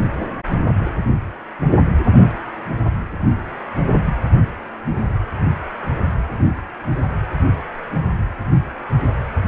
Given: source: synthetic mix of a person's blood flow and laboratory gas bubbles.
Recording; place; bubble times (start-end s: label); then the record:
Doppler ultrasound of blood flow; precordium
no bubbles
From the record:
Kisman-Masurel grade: 000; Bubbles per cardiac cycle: 0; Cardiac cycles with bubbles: 0%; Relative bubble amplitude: no bubbles discernible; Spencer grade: 0 (complete lack of bubble signals)